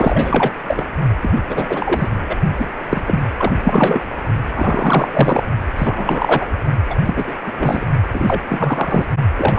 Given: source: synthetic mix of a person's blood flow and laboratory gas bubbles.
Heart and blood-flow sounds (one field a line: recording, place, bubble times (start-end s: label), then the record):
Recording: Doppler ultrasound of blood flow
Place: precordium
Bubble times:
0.00-0.52 s: bubbles
0.67-0.85 s: bubbles
1.22-1.42 s: bubbles
1.49-2.08 s: bubbles
2.29-2.36 s: bubbles
2.56-2.67 s: bubbles
2.89-3.19 s: bubbles
3.37-3.51 s: bubbles
3.64-4.06 s: bubbles
4.57-5.44 s: bubbles
5.78-6.54 s: bubbles
6.90-6.95 s: bubbles
7.04-7.33 s: bubbles
7.46-7.52 s: bubbles
7.58-7.87 s: bubbles
8.12-8.42 s: bubbles
8.49-9.06 s: bubbles
9.35-9.58 s: bubbles
From the record:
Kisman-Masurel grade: 343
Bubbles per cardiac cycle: rolling drumbeat, 9 or more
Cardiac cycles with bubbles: 100%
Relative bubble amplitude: loud (0.450 to 0.775)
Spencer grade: 3 (all of the cardiac periods contain showers or single bubble signals, but not dominating or overriding the cardiac motion signals)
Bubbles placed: only in the low amplitude regions of the cardiac cycle